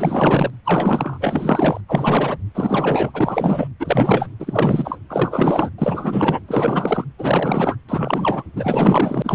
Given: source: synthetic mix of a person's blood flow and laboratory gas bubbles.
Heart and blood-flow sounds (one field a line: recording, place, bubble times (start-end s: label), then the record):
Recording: Doppler ultrasound of blood flow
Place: precordium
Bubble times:
0.00-0.50 s: bubbles
0.65-1.81 s: bubbles
1.88-2.37 s: bubbles
2.54-3.68 s: bubbles
3.79-4.29 s: bubbles
4.39-4.99 s: bubbles
5.09-5.70 s: bubbles
5.78-6.40 s: bubbles
6.48-7.05 s: bubbles
7.18-7.76 s: bubbles
7.88-8.43 s: bubbles
8.55-9.35 s: bubbles
From the record:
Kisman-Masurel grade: 444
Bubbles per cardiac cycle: continuous sound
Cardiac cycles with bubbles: 100%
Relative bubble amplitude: maximal (0.775 to 0.999)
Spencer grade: 4 (maximum detectable bubble signal sounding continuously throughout systole and diastole of every cardiac period, and overriding the amplitude of the normal cardiac signals)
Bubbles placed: anywhere in the cardiac cycle